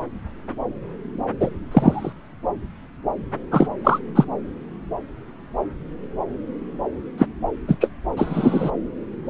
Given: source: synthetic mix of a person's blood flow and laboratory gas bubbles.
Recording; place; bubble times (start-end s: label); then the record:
Doppler ultrasound of blood flow; subclavian vein
1.40-1.50 s: bubbles
1.71-2.12 s: bubbles
3.51-3.68 s: bubbles
3.83-3.99 s: bubbles
4.15-4.25 s: bubbles
7.17-7.26 s: bubbles
7.67-7.76 s: bubbles
7.81-7.89 s: bubbles
8.16-8.71 s: bubbles
From the record:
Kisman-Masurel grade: 123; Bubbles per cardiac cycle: 1 to 2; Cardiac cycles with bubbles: 10 to 50%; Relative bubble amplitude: loud (0.450 to 0.775); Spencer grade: 2 (many but less than half of the cardiac periods contain bubble signals, singularly or in groups); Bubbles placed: anywhere in the cardiac cycle